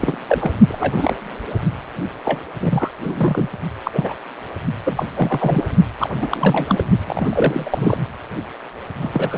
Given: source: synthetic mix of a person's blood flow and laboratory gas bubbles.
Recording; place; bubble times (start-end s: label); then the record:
Doppler ultrasound of blood flow; precordium
0.01-0.17 s: bubbles
0.27-0.53 s: bubbles
0.68-1.16 s: bubbles
2.25-2.41 s: bubbles
2.60-2.89 s: bubbles
3.03-3.50 s: bubbles
3.84-4.15 s: bubbles
4.85-5.06 s: bubbles
5.14-5.64 s: bubbles
5.99-6.84 s: bubbles
7.07-7.98 s: bubbles
9.00-9.38 s: bubbles
From the record:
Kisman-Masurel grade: 232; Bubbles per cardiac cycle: several, 3 to 8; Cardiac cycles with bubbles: 50 to 99%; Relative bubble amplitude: moderate (0.250 to 0.450); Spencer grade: 3 (all of the cardiac periods contain showers or single bubble signals, but not dominating or overriding the cardiac motion signals); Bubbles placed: only in the low amplitude regions of the cardiac cycle